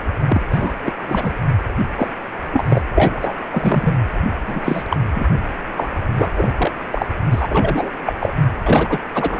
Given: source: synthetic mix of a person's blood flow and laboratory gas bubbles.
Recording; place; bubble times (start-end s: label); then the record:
Doppler ultrasound of blood flow; precordium
0.26-0.43 s: bubbles
0.51-0.73 s: bubbles
0.84-0.94 s: bubbles
1.06-1.35 s: bubbles
1.97-2.09 s: bubbles
2.53-2.65 s: bubbles
2.69-2.81 s: bubbles
2.96-3.33 s: bubbles
3.51-3.95 s: bubbles
4.46-4.83 s: bubbles
4.89-4.96 s: bubbles
5.13-5.27 s: bubbles
5.76-5.94 s: bubbles
6.17-6.31 s: bubbles
6.35-6.51 s: bubbles
6.57-6.71 s: bubbles
6.91-7.08 s: bubbles
7.31-7.90 s: bubbles
8.06-8.13 s: bubbles
8.21-8.34 s: bubbles
8.65-8.99 s: bubbles
9.14-9.40 s: bubbles
From the record:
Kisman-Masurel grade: 243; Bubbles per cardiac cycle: several, 3 to 8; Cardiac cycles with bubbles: 100%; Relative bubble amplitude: loud (0.450 to 0.775); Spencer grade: 3 (all of the cardiac periods contain showers or single bubble signals, but not dominating or overriding the cardiac motion signals); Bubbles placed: anywhere in the cardiac cycle